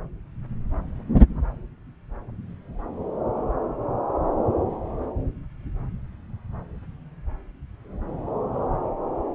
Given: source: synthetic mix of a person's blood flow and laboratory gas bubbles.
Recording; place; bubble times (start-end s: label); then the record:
Doppler ultrasound of blood flow; subclavian vein
no bubbles
From the record:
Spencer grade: 0 (complete lack of bubble signals)